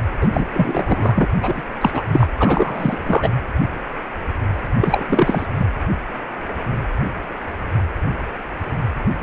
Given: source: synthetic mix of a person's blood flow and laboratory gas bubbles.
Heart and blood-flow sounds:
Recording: Doppler ultrasound of blood flow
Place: precordium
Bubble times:
0.20-0.28 s: bubbles
0.31-0.45 s: bubbles
0.53-1.25 s: bubbles
1.38-1.62 s: bubbles
1.81-2.04 s: bubbles
2.12-2.27 s: bubbles
2.39-3.29 s: bubbles
4.81-5.06 s: bubbles
5.08-5.46 s: bubbles
5.58-5.67 s: bubbles
From the record:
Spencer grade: 3 (all of the cardiac periods contain showers or single bubble signals, but not dominating or overriding the cardiac motion signals)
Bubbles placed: anywhere in the cardiac cycle

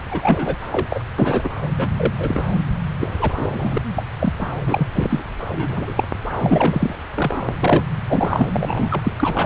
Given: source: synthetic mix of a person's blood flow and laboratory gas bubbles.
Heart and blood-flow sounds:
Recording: Doppler ultrasound of blood flow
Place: subclavian vein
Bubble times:
0.08-0.57 s: bubbles
0.71-1.03 s: bubbles
1.18-1.50 s: bubbles
1.62-1.69 s: bubbles
1.77-2.14 s: bubbles
2.19-2.44 s: bubbles
3.00-3.78 s: bubbles
3.95-4.05 s: bubbles
4.20-4.33 s: bubbles
4.40-4.46 s: bubbles
4.65-4.88 s: bubbles
4.94-5.23 s: bubbles
5.40-6.04 s: bubbles
6.39-6.96 s: bubbles
7.14-7.53 s: bubbles
7.59-7.84 s: bubbles
8.07-8.46 s: bubbles
8.52-9.13 s: bubbles
9.17-9.46 s: bubbles
From the record:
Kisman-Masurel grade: 243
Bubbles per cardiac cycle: several, 3 to 8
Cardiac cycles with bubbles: 100%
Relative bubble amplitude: loud (0.450 to 0.775)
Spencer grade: 3 (all of the cardiac periods contain showers or single bubble signals, but not dominating or overriding the cardiac motion signals)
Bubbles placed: anywhere in the cardiac cycle

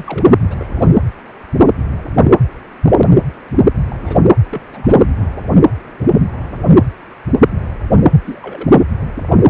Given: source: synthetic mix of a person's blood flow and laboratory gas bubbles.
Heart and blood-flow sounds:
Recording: Doppler ultrasound of blood flow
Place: precordium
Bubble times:
0.00-0.34 s: bubbles
0.50-0.91 s: bubbles
3.90-3.97 s: bubbles
4.00-4.21 s: bubbles
4.50-4.61 s: bubbles
4.72-5.06 s: bubbles
8.24-8.80 s: bubbles
From the record:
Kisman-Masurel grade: 221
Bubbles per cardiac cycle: several, 3 to 8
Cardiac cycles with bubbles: 10 to 50%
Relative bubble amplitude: barely perceptible (0.100 to 0.250)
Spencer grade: 2 (many but less than half of the cardiac periods contain bubble signals, singularly or in groups)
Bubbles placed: anywhere in the cardiac cycle

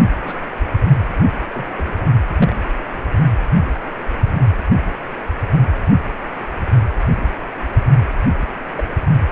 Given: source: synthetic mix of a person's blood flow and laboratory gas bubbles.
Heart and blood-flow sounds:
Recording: Doppler ultrasound of blood flow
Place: precordium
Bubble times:
0.23-0.46 s: bubbles
1.53-1.66 s: bubbles
1.77-1.96 s: bubbles
2.36-2.56 s: bubbles
8.40-8.45 s: bubbles
8.77-8.83 s: bubbles
From the record:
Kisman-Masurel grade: 121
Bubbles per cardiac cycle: 1 to 2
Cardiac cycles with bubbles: 10 to 50%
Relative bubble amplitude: barely perceptible (0.100 to 0.250)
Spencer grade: 2 (many but less than half of the cardiac periods contain bubble signals, singularly or in groups)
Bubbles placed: anywhere in the cardiac cycle

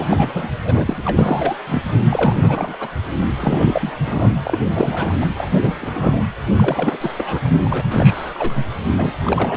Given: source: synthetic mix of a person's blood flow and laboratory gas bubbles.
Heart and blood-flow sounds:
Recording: Doppler ultrasound of blood flow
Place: precordium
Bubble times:
0.00-0.05 s: bubbles
0.09-0.49 s: bubbles
0.65-1.03 s: bubbles
1.05-1.55 s: bubbles
1.67-1.82 s: bubbles
2.10-2.76 s: bubbles
2.80-2.88 s: bubbles
3.40-3.91 s: bubbles
4.04-4.31 s: bubbles
4.44-4.58 s: bubbles
4.75-5.14 s: bubbles
5.21-5.27 s: bubbles
5.38-5.75 s: bubbles
5.82-6.25 s: bubbles
6.56-6.97 s: bubbles
7.00-7.39 s: bubbles
7.45-7.48 s: bubbles
7.65-7.87 s: bubbles
7.91-8.66 s: bubbles
8.91-9.14 s: bubbles
9.23-9.57 s: bubbles
From the record:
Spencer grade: 3 (all of the cardiac periods contain showers or single bubble signals, but not dominating or overriding the cardiac motion signals)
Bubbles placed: anywhere in the cardiac cycle

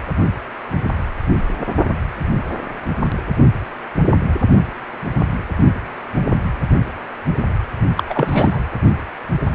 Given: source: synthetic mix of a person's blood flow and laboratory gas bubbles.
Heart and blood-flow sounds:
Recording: Doppler ultrasound of blood flow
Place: precordium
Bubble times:
7.96-8.04 s: bubbles
8.10-8.60 s: bubbles
From the record:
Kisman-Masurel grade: 223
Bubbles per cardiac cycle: several, 3 to 8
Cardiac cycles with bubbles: 10 to 50%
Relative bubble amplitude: loud (0.450 to 0.775)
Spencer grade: 2 (many but less than half of the cardiac periods contain bubble signals, singularly or in groups)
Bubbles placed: anywhere in the cardiac cycle

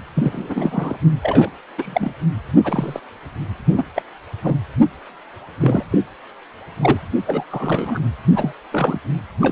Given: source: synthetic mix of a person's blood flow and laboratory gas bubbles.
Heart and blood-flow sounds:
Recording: Doppler ultrasound of blood flow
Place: precordium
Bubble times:
0.14-0.98 s: bubbles
1.23-1.51 s: bubbles
1.77-2.13 s: bubbles
2.64-3.00 s: bubbles
3.77-3.85 s: bubbles
3.95-4.02 s: bubbles
4.44-4.57 s: bubbles
5.60-5.84 s: bubbles
5.91-5.99 s: bubbles
6.78-6.99 s: bubbles
7.27-7.45 s: bubbles
7.51-7.99 s: bubbles
8.36-8.54 s: bubbles
8.72-9.00 s: bubbles
9.41-9.52 s: bubbles
From the record:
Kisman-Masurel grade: 232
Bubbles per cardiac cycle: several, 3 to 8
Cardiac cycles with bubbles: 50 to 99%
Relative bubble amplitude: moderate (0.250 to 0.450)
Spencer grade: 3 (all of the cardiac periods contain showers or single bubble signals, but not dominating or overriding the cardiac motion signals)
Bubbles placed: anywhere in the cardiac cycle

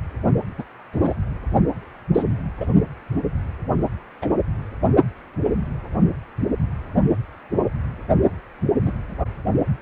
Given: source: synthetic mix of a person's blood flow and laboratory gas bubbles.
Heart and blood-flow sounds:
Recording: Doppler ultrasound of blood flow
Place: precordium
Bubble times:
0.58-0.63 s: bubbles
0.92-1.14 s: bubbles
2.15-2.23 s: bubbles
2.60-2.66 s: bubbles
4.21-4.27 s: bubbles
8.85-8.92 s: bubbles
From the record:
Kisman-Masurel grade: 122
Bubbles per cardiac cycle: 1 to 2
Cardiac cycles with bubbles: 10 to 50%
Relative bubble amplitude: moderate (0.250 to 0.450)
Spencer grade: 2 (many but less than half of the cardiac periods contain bubble signals, singularly or in groups)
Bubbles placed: only in the low amplitude regions of the cardiac cycle

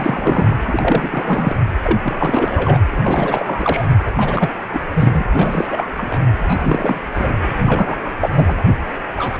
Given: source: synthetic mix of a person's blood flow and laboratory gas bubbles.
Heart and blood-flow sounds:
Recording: Doppler ultrasound of blood flow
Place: precordium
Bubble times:
0.00-0.56 s: bubbles
0.67-1.55 s: bubbles
1.83-1.99 s: bubbles
2.02-2.79 s: bubbles
2.90-3.87 s: bubbles
4.06-4.11 s: bubbles
4.15-4.50 s: bubbles
4.73-4.80 s: bubbles
4.94-5.26 s: bubbles
5.32-5.68 s: bubbles
5.72-5.88 s: bubbles
5.97-6.22 s: bubbles
6.43-7.01 s: bubbles
7.15-7.34 s: bubbles
7.59-7.97 s: bubbles
8.20-8.29 s: bubbles
8.36-8.72 s: bubbles
9.17-9.38 s: bubbles
From the record:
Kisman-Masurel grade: 343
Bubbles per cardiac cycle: rolling drumbeat, 9 or more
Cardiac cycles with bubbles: 100%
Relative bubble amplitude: loud (0.450 to 0.775)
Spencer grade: 3 (all of the cardiac periods contain showers or single bubble signals, but not dominating or overriding the cardiac motion signals)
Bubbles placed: anywhere in the cardiac cycle

